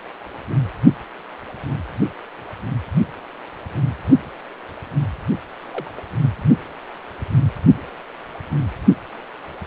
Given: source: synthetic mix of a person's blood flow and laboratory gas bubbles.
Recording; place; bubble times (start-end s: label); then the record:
Doppler ultrasound of blood flow; precordium
5.71-5.91 s: bubbles
5.97-6.01 s: bubbles
From the record:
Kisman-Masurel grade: 111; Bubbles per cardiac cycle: 1 to 2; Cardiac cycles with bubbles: 1 to 10%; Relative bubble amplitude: barely perceptible (0.100 to 0.250); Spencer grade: 1 (occasional bubble signal discernible with the cardiac motion signal, with majority of cardiac periods free of bubbles); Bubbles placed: only in the low amplitude regions of the cardiac cycle